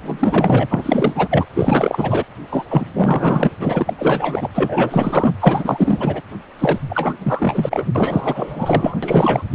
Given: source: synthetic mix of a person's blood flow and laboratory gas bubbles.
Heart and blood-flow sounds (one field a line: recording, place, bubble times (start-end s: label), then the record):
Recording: Doppler ultrasound of blood flow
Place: precordium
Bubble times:
0.04-0.67 s: bubbles
0.70-1.46 s: bubbles
1.53-2.24 s: bubbles
2.51-2.65 s: bubbles
2.69-2.86 s: bubbles
2.94-3.52 s: bubbles
3.60-3.94 s: bubbles
3.98-4.50 s: bubbles
4.54-5.32 s: bubbles
5.40-6.21 s: bubbles
6.59-6.79 s: bubbles
6.89-7.15 s: bubbles
7.19-7.87 s: bubbles
7.95-8.96 s: bubbles
9.03-9.44 s: bubbles
From the record:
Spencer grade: 4 (maximum detectable bubble signal sounding continuously throughout systole and diastole of every cardiac period, and overriding the amplitude of the normal cardiac signals)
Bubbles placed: anywhere in the cardiac cycle